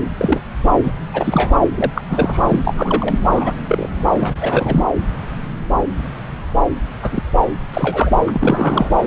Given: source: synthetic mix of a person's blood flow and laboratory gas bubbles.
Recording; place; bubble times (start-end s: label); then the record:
Doppler ultrasound of blood flow; subclavian vein
0.17-0.40 s: bubbles
0.83-0.93 s: bubbles
1.14-1.53 s: bubbles
1.75-1.91 s: bubbles
1.95-2.02 s: bubbles
2.09-2.40 s: bubbles
2.48-3.19 s: bubbles
3.31-3.53 s: bubbles
3.68-3.87 s: bubbles
4.18-4.37 s: bubbles
4.40-4.86 s: bubbles
7.03-7.23 s: bubbles
7.73-8.11 s: bubbles
8.27-8.90 s: bubbles
From the record:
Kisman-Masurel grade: 233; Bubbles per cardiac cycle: several, 3 to 8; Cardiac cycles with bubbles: 50 to 99%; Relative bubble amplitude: loud (0.450 to 0.775); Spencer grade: 3 (all of the cardiac periods contain showers or single bubble signals, but not dominating or overriding the cardiac motion signals); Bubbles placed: anywhere in the cardiac cycle